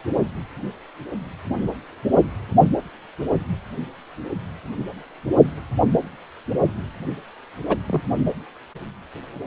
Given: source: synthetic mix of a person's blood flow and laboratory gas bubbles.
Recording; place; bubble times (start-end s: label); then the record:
Doppler ultrasound of blood flow; precordium
7.69-7.77 s: bubbles
7.88-8.02 s: bubbles
From the record:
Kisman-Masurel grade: 112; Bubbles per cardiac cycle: 1 to 2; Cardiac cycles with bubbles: 1 to 10%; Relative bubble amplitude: moderate (0.250 to 0.450); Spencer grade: 1 (occasional bubble signal discernible with the cardiac motion signal, with majority of cardiac periods free of bubbles); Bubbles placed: only in the low amplitude regions of the cardiac cycle